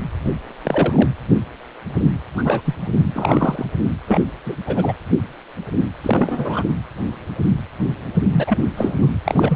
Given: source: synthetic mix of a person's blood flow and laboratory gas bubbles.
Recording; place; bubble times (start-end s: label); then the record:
Doppler ultrasound of blood flow; precordium
0.64-1.08 s: bubbles
2.37-2.61 s: bubbles
2.64-2.75 s: bubbles
3.13-3.66 s: bubbles
4.07-4.19 s: bubbles
4.46-4.56 s: bubbles
4.67-4.93 s: bubbles
6.03-6.65 s: bubbles
8.31-8.58 s: bubbles
8.77-8.94 s: bubbles
8.98-9.08 s: bubbles
9.25-9.56 s: bubbles
From the record:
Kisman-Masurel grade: 232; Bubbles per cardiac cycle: several, 3 to 8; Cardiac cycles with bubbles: 50 to 99%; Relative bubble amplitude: moderate (0.250 to 0.450); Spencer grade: 3 (all of the cardiac periods contain showers or single bubble signals, but not dominating or overriding the cardiac motion signals); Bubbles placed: anywhere in the cardiac cycle